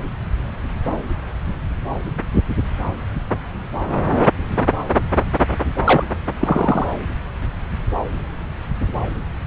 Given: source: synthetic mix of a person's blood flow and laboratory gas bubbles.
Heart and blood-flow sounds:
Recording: Doppler ultrasound of blood flow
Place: subclavian vein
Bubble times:
5.85-6.04 s: bubbles
6.39-6.88 s: bubbles
From the record:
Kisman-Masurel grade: 123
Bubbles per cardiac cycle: 1 to 2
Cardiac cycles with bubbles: 10 to 50%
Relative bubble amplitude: loud (0.450 to 0.775)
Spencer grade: 2 (many but less than half of the cardiac periods contain bubble signals, singularly or in groups)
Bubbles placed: anywhere in the cardiac cycle

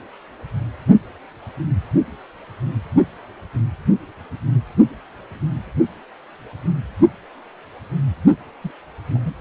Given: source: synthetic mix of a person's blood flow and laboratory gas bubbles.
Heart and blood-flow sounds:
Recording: Doppler ultrasound of blood flow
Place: precordium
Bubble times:
8.61-8.71 s: bubbles
9.14-9.34 s: bubbles
From the record:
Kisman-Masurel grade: 111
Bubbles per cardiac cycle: 1 to 2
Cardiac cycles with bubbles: 1 to 10%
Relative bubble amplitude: barely perceptible (0.100 to 0.250)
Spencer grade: 1 (occasional bubble signal discernible with the cardiac motion signal, with majority of cardiac periods free of bubbles)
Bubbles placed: only in the low amplitude regions of the cardiac cycle

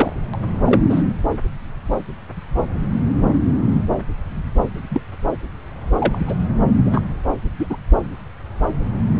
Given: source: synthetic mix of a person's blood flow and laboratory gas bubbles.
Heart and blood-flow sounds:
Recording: Doppler ultrasound of blood flow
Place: subclavian vein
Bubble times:
0.00-0.13 s: bubbles
0.34-0.37 s: bubbles
0.65-0.81 s: bubbles
0.89-1.03 s: bubbles
4.91-5.01 s: bubbles
5.99-6.19 s: bubbles
6.27-6.35 s: bubbles
6.84-7.04 s: bubbles
7.59-7.67 s: bubbles
7.70-7.77 s: bubbles
From the record:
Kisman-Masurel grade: 123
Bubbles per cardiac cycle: 1 to 2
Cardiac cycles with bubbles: 10 to 50%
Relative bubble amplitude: loud (0.450 to 0.775)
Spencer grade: 2 (many but less than half of the cardiac periods contain bubble signals, singularly or in groups)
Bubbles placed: anywhere in the cardiac cycle

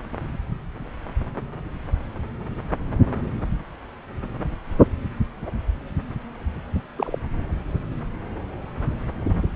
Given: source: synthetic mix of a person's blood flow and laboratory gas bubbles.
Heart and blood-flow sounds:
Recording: Doppler ultrasound of blood flow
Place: subclavian vein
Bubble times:
6.97-7.18 s: bubbles
From the record:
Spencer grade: 1 (occasional bubble signal discernible with the cardiac motion signal, with majority of cardiac periods free of bubbles)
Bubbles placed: anywhere in the cardiac cycle

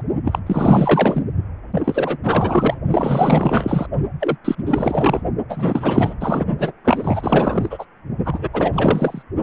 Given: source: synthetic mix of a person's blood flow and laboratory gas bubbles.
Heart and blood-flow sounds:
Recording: Doppler ultrasound of blood flow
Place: precordium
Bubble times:
0.00-0.02 s: bubbles
0.24-0.39 s: bubbles
0.46-1.23 s: bubbles
1.75-2.17 s: bubbles
2.23-2.77 s: bubbles
2.91-3.86 s: bubbles
4.20-4.37 s: bubbles
4.45-4.63 s: bubbles
4.67-5.23 s: bubbles
5.49-6.15 s: bubbles
6.20-6.46 s: bubbles
6.58-6.71 s: bubbles
6.84-7.85 s: bubbles
8.24-8.48 s: bubbles
8.53-9.23 s: bubbles
From the record:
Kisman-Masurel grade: 444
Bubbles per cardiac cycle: continuous sound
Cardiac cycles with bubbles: 100%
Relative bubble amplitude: maximal (0.775 to 0.999)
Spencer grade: 4 (maximum detectable bubble signal sounding continuously throughout systole and diastole of every cardiac period, and overriding the amplitude of the normal cardiac signals)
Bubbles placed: only in the low amplitude regions of the cardiac cycle

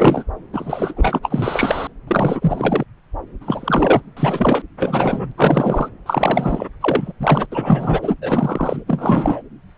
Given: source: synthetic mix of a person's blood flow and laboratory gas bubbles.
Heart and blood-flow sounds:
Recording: Doppler ultrasound of blood flow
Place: subclavian vein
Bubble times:
0.00-0.24 s: bubbles
0.52-0.93 s: bubbles
0.96-1.20 s: bubbles
1.22-1.87 s: bubbles
2.07-2.84 s: bubbles
3.41-4.00 s: bubbles
4.17-4.62 s: bubbles
4.79-5.32 s: bubbles
5.37-5.89 s: bubbles
6.06-6.67 s: bubbles
6.81-7.12 s: bubbles
7.20-7.46 s: bubbles
7.52-8.14 s: bubbles
8.21-8.84 s: bubbles
8.87-9.41 s: bubbles
From the record:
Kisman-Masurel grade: 333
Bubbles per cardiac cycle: rolling drumbeat, 9 or more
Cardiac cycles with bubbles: 50 to 99%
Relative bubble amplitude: loud (0.450 to 0.775)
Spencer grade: 3 (all of the cardiac periods contain showers or single bubble signals, but not dominating or overriding the cardiac motion signals)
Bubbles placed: anywhere in the cardiac cycle

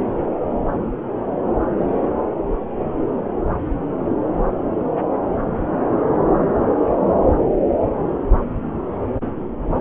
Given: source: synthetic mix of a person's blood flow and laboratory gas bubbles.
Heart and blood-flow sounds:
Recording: Doppler ultrasound of blood flow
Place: subclavian vein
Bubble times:
no bubbles
From the record:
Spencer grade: 0 (complete lack of bubble signals)

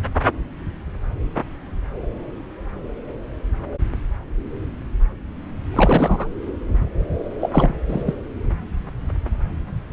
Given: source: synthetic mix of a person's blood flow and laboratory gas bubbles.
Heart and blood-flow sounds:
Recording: Doppler ultrasound of blood flow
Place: subclavian vein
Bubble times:
5.71-6.29 s: bubbles
7.40-7.75 s: bubbles
7.88-8.15 s: bubbles
From the record:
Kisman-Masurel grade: 222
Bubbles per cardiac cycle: several, 3 to 8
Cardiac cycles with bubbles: 10 to 50%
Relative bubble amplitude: moderate (0.250 to 0.450)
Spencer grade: 2 (many but less than half of the cardiac periods contain bubble signals, singularly or in groups)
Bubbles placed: anywhere in the cardiac cycle

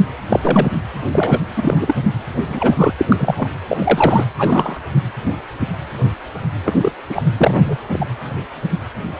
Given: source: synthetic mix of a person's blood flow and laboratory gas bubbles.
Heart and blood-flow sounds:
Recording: Doppler ultrasound of blood flow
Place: precordium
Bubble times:
0.00-0.04 s: bubbles
0.29-0.40 s: bubbles
0.43-0.72 s: bubbles
1.11-1.40 s: bubbles
1.55-1.95 s: bubbles
2.49-2.92 s: bubbles
2.98-3.34 s: bubbles
3.37-3.48 s: bubbles
3.67-4.24 s: bubbles
4.38-4.79 s: bubbles
6.66-6.74 s: bubbles
6.81-6.92 s: bubbles
7.09-7.22 s: bubbles
7.37-7.78 s: bubbles
7.93-8.06 s: bubbles
From the record:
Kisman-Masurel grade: 233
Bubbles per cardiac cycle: several, 3 to 8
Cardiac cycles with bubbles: 50 to 99%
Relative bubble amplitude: loud (0.450 to 0.775)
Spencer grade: 3 (all of the cardiac periods contain showers or single bubble signals, but not dominating or overriding the cardiac motion signals)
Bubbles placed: anywhere in the cardiac cycle

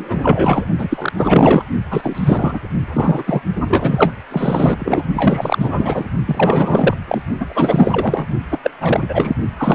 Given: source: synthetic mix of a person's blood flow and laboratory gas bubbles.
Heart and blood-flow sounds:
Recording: Doppler ultrasound of blood flow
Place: precordium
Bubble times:
0.00-0.65 s: bubbles
0.78-0.88 s: bubbles
0.90-1.12 s: bubbles
1.17-1.64 s: bubbles
1.90-2.59 s: bubbles
2.93-3.23 s: bubbles
3.26-3.42 s: bubbles
3.56-4.15 s: bubbles
4.29-5.03 s: bubbles
5.14-6.06 s: bubbles
6.25-6.96 s: bubbles
7.08-7.22 s: bubbles
7.40-8.25 s: bubbles
8.51-8.59 s: bubbles
8.63-8.71 s: bubbles
8.80-9.34 s: bubbles
9.56-9.75 s: bubbles
From the record:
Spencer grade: 4 (maximum detectable bubble signal sounding continuously throughout systole and diastole of every cardiac period, and overriding the amplitude of the normal cardiac signals)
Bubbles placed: only in the low amplitude regions of the cardiac cycle

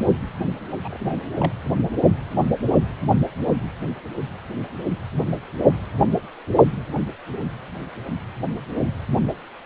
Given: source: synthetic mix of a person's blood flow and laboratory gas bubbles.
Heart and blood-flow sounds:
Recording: Doppler ultrasound of blood flow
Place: precordium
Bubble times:
0.69-0.76 s: bubbles
0.84-1.16 s: bubbles
1.40-1.52 s: bubbles
From the record:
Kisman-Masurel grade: 211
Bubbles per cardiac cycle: several, 3 to 8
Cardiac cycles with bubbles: 1 to 10%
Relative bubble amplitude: barely perceptible (0.100 to 0.250)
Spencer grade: 1 (occasional bubble signal discernible with the cardiac motion signal, with majority of cardiac periods free of bubbles)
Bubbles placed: only in the low amplitude regions of the cardiac cycle

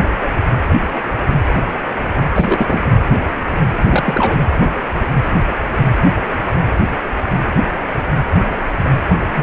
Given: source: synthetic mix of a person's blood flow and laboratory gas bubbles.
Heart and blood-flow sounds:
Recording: Doppler ultrasound of blood flow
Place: precordium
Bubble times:
2.35-2.85 s: bubbles
3.90-4.44 s: bubbles
9.21-9.43 s: bubbles
From the record:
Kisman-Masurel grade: 223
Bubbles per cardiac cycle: several, 3 to 8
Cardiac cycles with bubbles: 10 to 50%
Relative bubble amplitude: loud (0.450 to 0.775)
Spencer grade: 2 (many but less than half of the cardiac periods contain bubble signals, singularly or in groups)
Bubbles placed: anywhere in the cardiac cycle

